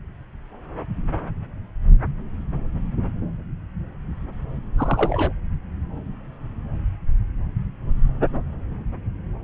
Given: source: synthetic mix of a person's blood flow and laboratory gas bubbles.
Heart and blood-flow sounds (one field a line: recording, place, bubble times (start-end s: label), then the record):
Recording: Doppler ultrasound of blood flow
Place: subclavian vein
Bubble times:
4.77-5.32 s: bubbles
From the record:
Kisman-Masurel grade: 222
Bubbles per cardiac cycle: several, 3 to 8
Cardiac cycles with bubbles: 10 to 50%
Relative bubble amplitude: moderate (0.250 to 0.450)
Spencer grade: 2 (many but less than half of the cardiac periods contain bubble signals, singularly or in groups)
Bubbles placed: anywhere in the cardiac cycle